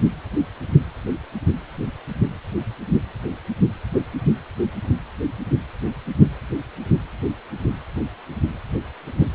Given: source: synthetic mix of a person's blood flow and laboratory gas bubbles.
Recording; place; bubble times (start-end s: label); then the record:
Doppler ultrasound of blood flow; precordium
no bubbles
From the record:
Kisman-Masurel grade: 000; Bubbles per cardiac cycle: 0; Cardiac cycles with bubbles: 0%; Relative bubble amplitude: no bubbles discernible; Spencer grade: 0 (complete lack of bubble signals)